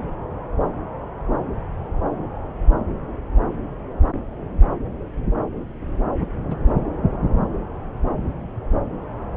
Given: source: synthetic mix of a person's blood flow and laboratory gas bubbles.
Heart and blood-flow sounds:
Doppler ultrasound of blood flow; subclavian vein
6.50-6.56 s: bubbles
From the record:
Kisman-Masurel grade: 112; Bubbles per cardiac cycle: 1 to 2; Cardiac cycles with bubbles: 1 to 10%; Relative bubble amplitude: moderate (0.250 to 0.450); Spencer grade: 1 (occasional bubble signal discernible with the cardiac motion signal, with majority of cardiac periods free of bubbles); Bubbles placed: anywhere in the cardiac cycle

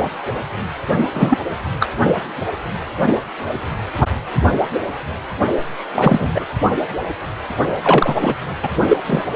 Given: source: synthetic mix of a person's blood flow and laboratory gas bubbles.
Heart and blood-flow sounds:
Doppler ultrasound of blood flow; precordium
1.14-1.38 s: bubbles
1.80-1.88 s: bubbles
5.93-6.46 s: bubbles
7.82-8.15 s: bubbles
8.21-8.35 s: bubbles
8.62-8.70 s: bubbles
8.89-8.98 s: bubbles
9.06-9.25 s: bubbles
From the record:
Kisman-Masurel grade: 233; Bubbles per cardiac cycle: several, 3 to 8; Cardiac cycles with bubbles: 50 to 99%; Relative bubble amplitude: loud (0.450 to 0.775); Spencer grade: 3 (all of the cardiac periods contain showers or single bubble signals, but not dominating or overriding the cardiac motion signals); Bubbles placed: only in the low amplitude regions of the cardiac cycle

